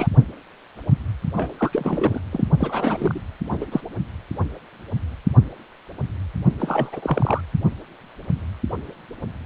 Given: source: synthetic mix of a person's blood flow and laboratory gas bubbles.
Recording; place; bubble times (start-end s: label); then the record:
Doppler ultrasound of blood flow; precordium
0.00-0.07 s: bubbles
1.36-1.52 s: bubbles
1.57-2.21 s: bubbles
2.32-2.44 s: bubbles
2.58-3.21 s: bubbles
3.46-3.66 s: bubbles
3.71-3.81 s: bubbles
6.59-6.90 s: bubbles
6.92-7.41 s: bubbles
From the record:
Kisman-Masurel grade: 332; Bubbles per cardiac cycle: rolling drumbeat, 9 or more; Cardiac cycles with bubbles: 50 to 99%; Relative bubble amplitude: moderate (0.250 to 0.450); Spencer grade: 3 (all of the cardiac periods contain showers or single bubble signals, but not dominating or overriding the cardiac motion signals); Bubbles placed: only in the low amplitude regions of the cardiac cycle